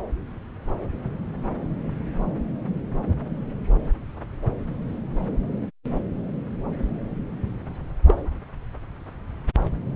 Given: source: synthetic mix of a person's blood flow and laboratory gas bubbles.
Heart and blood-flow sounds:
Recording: Doppler ultrasound of blood flow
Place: subclavian vein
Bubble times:
8.07-8.15 s: bubbles
From the record:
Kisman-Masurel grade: 112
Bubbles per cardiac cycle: 1 to 2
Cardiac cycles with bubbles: 1 to 10%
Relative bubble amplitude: moderate (0.250 to 0.450)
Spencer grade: 1 (occasional bubble signal discernible with the cardiac motion signal, with majority of cardiac periods free of bubbles)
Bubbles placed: anywhere in the cardiac cycle

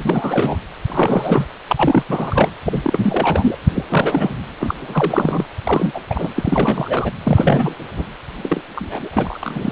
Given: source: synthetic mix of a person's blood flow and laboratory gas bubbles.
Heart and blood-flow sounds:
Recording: Doppler ultrasound of blood flow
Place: precordium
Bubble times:
0.03-0.56 s: bubbles
0.88-1.46 s: bubbles
1.68-2.03 s: bubbles
2.08-2.49 s: bubbles
2.65-3.58 s: bubbles
3.67-3.71 s: bubbles
3.75-3.83 s: bubbles
3.90-4.36 s: bubbles
4.59-5.46 s: bubbles
5.63-6.00 s: bubbles
6.09-6.33 s: bubbles
6.36-7.12 s: bubbles
7.23-7.74 s: bubbles
7.96-8.04 s: bubbles
8.38-8.62 s: bubbles
8.76-9.08 s: bubbles
9.11-9.71 s: bubbles
From the record:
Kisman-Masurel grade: 342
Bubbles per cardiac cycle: rolling drumbeat, 9 or more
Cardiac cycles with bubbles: 100%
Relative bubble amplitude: moderate (0.250 to 0.450)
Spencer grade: 3 (all of the cardiac periods contain showers or single bubble signals, but not dominating or overriding the cardiac motion signals)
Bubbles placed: anywhere in the cardiac cycle

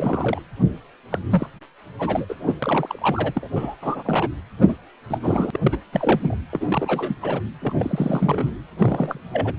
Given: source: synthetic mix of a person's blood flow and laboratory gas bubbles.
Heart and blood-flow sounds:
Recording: Doppler ultrasound of blood flow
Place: precordium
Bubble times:
0.00-0.40 s: bubbles
1.11-1.19 s: bubbles
1.30-1.47 s: bubbles
1.99-2.25 s: bubbles
2.29-2.35 s: bubbles
2.45-2.55 s: bubbles
2.62-3.48 s: bubbles
3.55-3.76 s: bubbles
3.82-4.29 s: bubbles
4.59-4.75 s: bubbles
5.09-5.18 s: bubbles
5.22-5.58 s: bubbles
5.62-5.77 s: bubbles
5.92-6.37 s: bubbles
6.53-7.15 s: bubbles
7.22-7.40 s: bubbles
7.61-7.73 s: bubbles
7.79-8.51 s: bubbles
8.79-9.20 s: bubbles
9.33-9.53 s: bubbles
From the record:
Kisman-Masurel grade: 342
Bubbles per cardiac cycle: rolling drumbeat, 9 or more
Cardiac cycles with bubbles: 100%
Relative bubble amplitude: moderate (0.250 to 0.450)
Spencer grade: 3 (all of the cardiac periods contain showers or single bubble signals, but not dominating or overriding the cardiac motion signals)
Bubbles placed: anywhere in the cardiac cycle

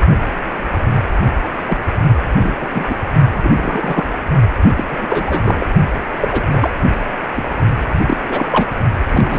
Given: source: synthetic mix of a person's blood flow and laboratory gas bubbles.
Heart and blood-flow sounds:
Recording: Doppler ultrasound of blood flow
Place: precordium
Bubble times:
1.67-1.77 s: bubbles
2.38-2.54 s: bubbles
2.60-2.68 s: bubbles
2.74-2.85 s: bubbles
2.89-2.95 s: bubbles
3.35-3.50 s: bubbles
3.56-4.05 s: bubbles
4.61-4.71 s: bubbles
4.76-4.84 s: bubbles
4.90-5.67 s: bubbles
6.17-6.28 s: bubbles
6.31-6.46 s: bubbles
6.51-6.71 s: bubbles
7.36-7.43 s: bubbles
7.88-8.17 s: bubbles
8.29-8.66 s: bubbles
9.08-9.38 s: bubbles
From the record:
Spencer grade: 3 (all of the cardiac periods contain showers or single bubble signals, but not dominating or overriding the cardiac motion signals)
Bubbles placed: only in the low amplitude regions of the cardiac cycle

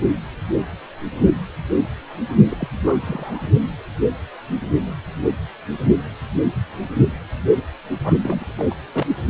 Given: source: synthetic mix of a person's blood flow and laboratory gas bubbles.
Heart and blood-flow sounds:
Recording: Doppler ultrasound of blood flow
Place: precordium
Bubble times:
2.50-2.69 s: bubbles
2.85-3.49 s: bubbles
8.04-8.14 s: bubbles
8.21-8.53 s: bubbles
8.56-8.64 s: bubbles
8.70-8.75 s: bubbles
8.92-9.06 s: bubbles
From the record:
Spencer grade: 2 (many but less than half of the cardiac periods contain bubble signals, singularly or in groups)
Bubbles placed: only in the low amplitude regions of the cardiac cycle

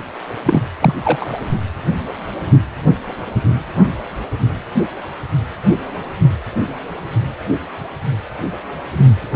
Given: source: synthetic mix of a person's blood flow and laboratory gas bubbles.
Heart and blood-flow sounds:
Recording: Doppler ultrasound of blood flow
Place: precordium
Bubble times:
0.45-0.62 s: bubbles
0.80-0.94 s: bubbles
1.04-1.37 s: bubbles
From the record:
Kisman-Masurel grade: 213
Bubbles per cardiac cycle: several, 3 to 8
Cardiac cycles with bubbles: 1 to 10%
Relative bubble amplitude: loud (0.450 to 0.775)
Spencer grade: 1 (occasional bubble signal discernible with the cardiac motion signal, with majority of cardiac periods free of bubbles)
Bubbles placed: anywhere in the cardiac cycle

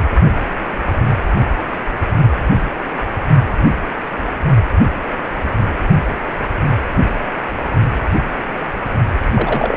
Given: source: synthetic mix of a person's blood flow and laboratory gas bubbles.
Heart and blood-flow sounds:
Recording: Doppler ultrasound of blood flow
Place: precordium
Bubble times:
9.35-9.77 s: bubbles
From the record:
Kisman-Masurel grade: 222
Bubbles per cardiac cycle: several, 3 to 8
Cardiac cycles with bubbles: 10 to 50%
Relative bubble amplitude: moderate (0.250 to 0.450)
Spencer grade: 2 (many but less than half of the cardiac periods contain bubble signals, singularly or in groups)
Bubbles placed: only in the low amplitude regions of the cardiac cycle

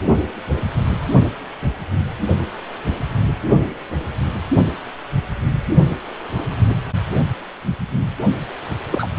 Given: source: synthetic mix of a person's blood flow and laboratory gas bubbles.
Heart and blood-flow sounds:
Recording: Doppler ultrasound of blood flow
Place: precordium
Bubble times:
8.92-9.07 s: bubbles
9.17-9.19 s: bubbles
From the record:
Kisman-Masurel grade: 113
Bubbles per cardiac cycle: 1 to 2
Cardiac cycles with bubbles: 1 to 10%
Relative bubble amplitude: loud (0.450 to 0.775)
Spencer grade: 1 (occasional bubble signal discernible with the cardiac motion signal, with majority of cardiac periods free of bubbles)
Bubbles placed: only in the low amplitude regions of the cardiac cycle

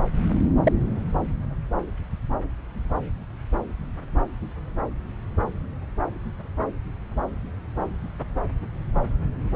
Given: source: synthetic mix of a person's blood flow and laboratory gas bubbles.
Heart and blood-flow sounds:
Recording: Doppler ultrasound of blood flow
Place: subclavian vein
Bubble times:
0.63-0.73 s: bubbles
From the record:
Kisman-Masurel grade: 122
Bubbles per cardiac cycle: 1 to 2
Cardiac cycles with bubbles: 10 to 50%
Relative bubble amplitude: moderate (0.250 to 0.450)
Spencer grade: 2 (many but less than half of the cardiac periods contain bubble signals, singularly or in groups)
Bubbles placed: anywhere in the cardiac cycle

